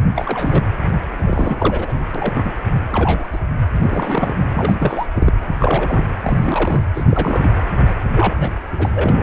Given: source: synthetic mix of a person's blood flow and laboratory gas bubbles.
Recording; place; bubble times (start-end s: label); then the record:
Doppler ultrasound of blood flow; precordium
0.01-0.03 s: bubbles
0.15-0.63 s: bubbles
1.16-2.03 s: bubbles
2.15-2.51 s: bubbles
2.90-3.28 s: bubbles
3.32-3.39 s: bubbles
3.75-4.36 s: bubbles
4.52-4.75 s: bubbles
4.78-5.07 s: bubbles
5.14-5.31 s: bubbles
5.47-5.56 s: bubbles
5.58-6.08 s: bubbles
6.21-6.82 s: bubbles
6.94-7.04 s: bubbles
7.10-7.58 s: bubbles
8.15-8.55 s: bubbles
8.78-8.89 s: bubbles
8.94-9.23 s: bubbles
From the record:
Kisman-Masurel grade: 342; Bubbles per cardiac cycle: rolling drumbeat, 9 or more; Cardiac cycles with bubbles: 100%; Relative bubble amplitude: moderate (0.250 to 0.450); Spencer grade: 3 (all of the cardiac periods contain showers or single bubble signals, but not dominating or overriding the cardiac motion signals); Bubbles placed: anywhere in the cardiac cycle